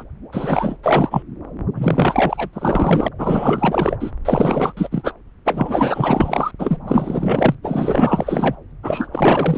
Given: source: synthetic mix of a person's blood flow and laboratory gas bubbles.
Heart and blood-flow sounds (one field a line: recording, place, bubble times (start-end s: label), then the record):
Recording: Doppler ultrasound of blood flow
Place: subclavian vein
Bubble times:
0.00-0.03 s: bubbles
0.32-0.77 s: bubbles
0.82-1.23 s: bubbles
1.75-2.50 s: bubbles
2.53-3.08 s: bubbles
3.18-3.96 s: bubbles
4.00-4.12 s: bubbles
4.25-4.72 s: bubbles
4.76-4.88 s: bubbles
4.91-5.13 s: bubbles
5.45-6.51 s: bubbles
6.59-6.79 s: bubbles
6.87-7.55 s: bubbles
7.62-8.55 s: bubbles
8.82-9.07 s: bubbles
9.12-9.58 s: bubbles
From the record:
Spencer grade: 4 (maximum detectable bubble signal sounding continuously throughout systole and diastole of every cardiac period, and overriding the amplitude of the normal cardiac signals)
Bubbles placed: anywhere in the cardiac cycle